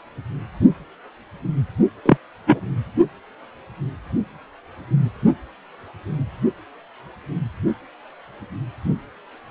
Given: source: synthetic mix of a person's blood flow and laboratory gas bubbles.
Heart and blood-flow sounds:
Doppler ultrasound of blood flow; precordium
2.06-2.17 s: bubbles
2.46-2.60 s: bubbles
From the record:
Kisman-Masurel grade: 113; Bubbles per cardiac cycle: 1 to 2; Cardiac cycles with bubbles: 1 to 10%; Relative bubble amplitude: loud (0.450 to 0.775); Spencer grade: 1 (occasional bubble signal discernible with the cardiac motion signal, with majority of cardiac periods free of bubbles); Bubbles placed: only in the low amplitude regions of the cardiac cycle

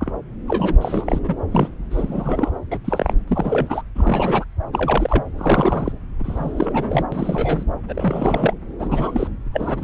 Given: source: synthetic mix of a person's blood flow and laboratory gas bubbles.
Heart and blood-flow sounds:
Doppler ultrasound of blood flow; subclavian vein
0.01-0.12 s: bubbles
0.47-0.76 s: bubbles
0.81-1.19 s: bubbles
1.23-1.34 s: bubbles
1.50-1.69 s: bubbles
1.91-2.52 s: bubbles
2.72-2.78 s: bubbles
2.85-3.14 s: bubbles
3.27-3.84 s: bubbles
3.95-4.44 s: bubbles
4.72-5.24 s: bubbles
5.36-5.92 s: bubbles
6.19-7.05 s: bubbles
7.12-7.63 s: bubbles
7.88-8.54 s: bubbles
8.79-9.28 s: bubbles
9.53-9.83 s: bubbles
From the record:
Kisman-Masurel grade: 342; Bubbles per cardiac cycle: rolling drumbeat, 9 or more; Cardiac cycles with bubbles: 100%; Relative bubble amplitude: moderate (0.250 to 0.450); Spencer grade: 3 (all of the cardiac periods contain showers or single bubble signals, but not dominating or overriding the cardiac motion signals); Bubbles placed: anywhere in the cardiac cycle

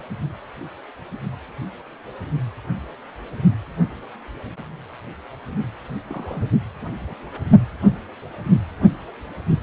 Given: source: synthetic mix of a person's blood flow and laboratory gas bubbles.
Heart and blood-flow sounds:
Doppler ultrasound of blood flow; precordium
6.09-6.49 s: bubbles
6.82-6.85 s: bubbles
7.09-7.14 s: bubbles
8.55-8.60 s: bubbles
From the record:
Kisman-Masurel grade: 121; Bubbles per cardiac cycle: 1 to 2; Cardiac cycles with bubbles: 10 to 50%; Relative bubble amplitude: barely perceptible (0.100 to 0.250); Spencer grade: 2 (many but less than half of the cardiac periods contain bubble signals, singularly or in groups); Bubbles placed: only in the low amplitude regions of the cardiac cycle

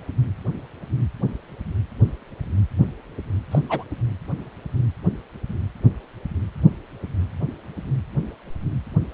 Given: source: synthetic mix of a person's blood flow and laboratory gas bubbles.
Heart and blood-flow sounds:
Doppler ultrasound of blood flow; precordium
3.51-3.59 s: bubbles
3.69-3.83 s: bubbles
From the record:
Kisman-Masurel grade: 122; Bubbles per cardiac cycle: 1 to 2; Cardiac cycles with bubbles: 10 to 50%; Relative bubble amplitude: moderate (0.250 to 0.450); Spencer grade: 2 (many but less than half of the cardiac periods contain bubble signals, singularly or in groups); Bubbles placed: anywhere in the cardiac cycle

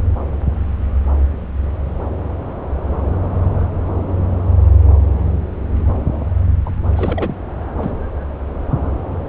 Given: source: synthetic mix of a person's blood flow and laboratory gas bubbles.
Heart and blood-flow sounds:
Doppler ultrasound of blood flow; subclavian vein
6.65-6.71 s: bubbles
6.94-7.34 s: bubbles
7.77-7.93 s: bubbles
From the record:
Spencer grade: 1 (occasional bubble signal discernible with the cardiac motion signal, with majority of cardiac periods free of bubbles); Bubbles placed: anywhere in the cardiac cycle

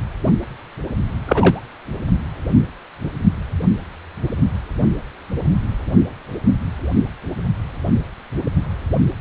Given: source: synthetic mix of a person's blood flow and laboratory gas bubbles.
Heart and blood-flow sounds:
Doppler ultrasound of blood flow; precordium
1.26-1.64 s: bubbles
From the record:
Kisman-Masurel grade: 213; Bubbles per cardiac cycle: several, 3 to 8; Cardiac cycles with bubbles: 1 to 10%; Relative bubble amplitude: loud (0.450 to 0.775); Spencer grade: 1 (occasional bubble signal discernible with the cardiac motion signal, with majority of cardiac periods free of bubbles); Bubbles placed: anywhere in the cardiac cycle

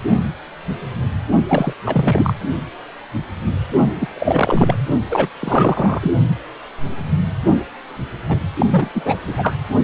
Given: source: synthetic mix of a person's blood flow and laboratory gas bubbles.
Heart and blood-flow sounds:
Doppler ultrasound of blood flow; precordium
1.47-1.73 s: bubbles
1.85-2.33 s: bubbles
4.00-4.08 s: bubbles
4.14-4.81 s: bubbles
5.09-5.29 s: bubbles
5.39-6.12 s: bubbles
8.29-8.45 s: bubbles
8.59-8.66 s: bubbles
8.70-8.89 s: bubbles
8.94-9.17 s: bubbles
9.27-9.55 s: bubbles
From the record:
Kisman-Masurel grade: 333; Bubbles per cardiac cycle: rolling drumbeat, 9 or more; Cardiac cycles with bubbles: 50 to 99%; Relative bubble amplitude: loud (0.450 to 0.775); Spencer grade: 3 (all of the cardiac periods contain showers or single bubble signals, but not dominating or overriding the cardiac motion signals); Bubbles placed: only in the low amplitude regions of the cardiac cycle

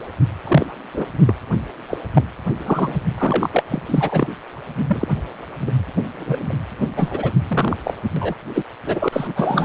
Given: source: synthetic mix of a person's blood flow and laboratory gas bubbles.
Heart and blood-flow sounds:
Doppler ultrasound of blood flow; precordium
0.44-0.65 s: bubbles
0.94-1.07 s: bubbles
1.25-1.33 s: bubbles
1.89-1.97 s: bubbles
2.14-2.25 s: bubbles
2.66-3.05 s: bubbles
3.17-3.49 s: bubbles
3.52-3.63 s: bubbles
3.69-3.82 s: bubbles
3.86-4.27 s: bubbles
4.88-5.08 s: bubbles
5.67-5.71 s: bubbles
6.14-6.53 s: bubbles
6.96-7.31 s: bubbles
7.48-7.76 s: bubbles
7.84-7.93 s: bubbles
8.16-8.35 s: bubbles
8.54-8.63 s: bubbles
8.85-9.09 s: bubbles
9.12-9.65 s: bubbles
From the record:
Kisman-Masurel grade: 243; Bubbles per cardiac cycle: several, 3 to 8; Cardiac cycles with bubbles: 100%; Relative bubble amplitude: loud (0.450 to 0.775); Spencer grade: 3 (all of the cardiac periods contain showers or single bubble signals, but not dominating or overriding the cardiac motion signals); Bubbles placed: anywhere in the cardiac cycle

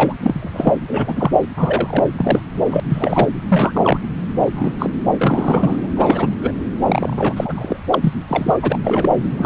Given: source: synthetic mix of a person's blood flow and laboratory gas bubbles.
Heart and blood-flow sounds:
Doppler ultrasound of blood flow; subclavian vein
0.00-0.13 s: bubbles
0.18-0.50 s: bubbles
0.53-0.74 s: bubbles
0.88-1.30 s: bubbles
1.56-2.04 s: bubbles
2.17-2.40 s: bubbles
2.70-2.80 s: bubbles
2.89-3.28 s: bubbles
3.48-3.99 s: bubbles
4.38-4.73 s: bubbles
4.79-4.90 s: bubbles
5.17-5.87 s: bubbles
5.96-6.32 s: bubbles
6.42-6.52 s: bubbles
6.86-7.33 s: bubbles
7.36-7.76 s: bubbles
7.91-8.12 s: bubbles
8.28-8.58 s: bubbles
8.62-8.80 s: bubbles
8.83-9.09 s: bubbles
9.38-9.46 s: bubbles
From the record:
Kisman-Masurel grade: 243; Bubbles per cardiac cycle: several, 3 to 8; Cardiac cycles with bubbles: 100%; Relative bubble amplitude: loud (0.450 to 0.775); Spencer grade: 3 (all of the cardiac periods contain showers or single bubble signals, but not dominating or overriding the cardiac motion signals); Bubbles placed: anywhere in the cardiac cycle

